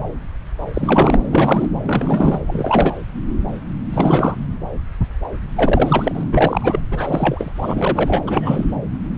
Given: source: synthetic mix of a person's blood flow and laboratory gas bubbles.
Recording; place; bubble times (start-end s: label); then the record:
Doppler ultrasound of blood flow; subclavian vein
0.73-1.19 s: bubbles
1.26-1.69 s: bubbles
1.84-2.39 s: bubbles
2.46-2.94 s: bubbles
3.93-4.37 s: bubbles
5.55-6.24 s: bubbles
6.32-6.79 s: bubbles
6.91-7.51 s: bubbles
7.62-8.20 s: bubbles
8.27-8.64 s: bubbles
From the record:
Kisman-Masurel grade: 333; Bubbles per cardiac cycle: rolling drumbeat, 9 or more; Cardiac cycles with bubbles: 50 to 99%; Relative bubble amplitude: loud (0.450 to 0.775); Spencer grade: 3 (all of the cardiac periods contain showers or single bubble signals, but not dominating or overriding the cardiac motion signals); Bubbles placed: anywhere in the cardiac cycle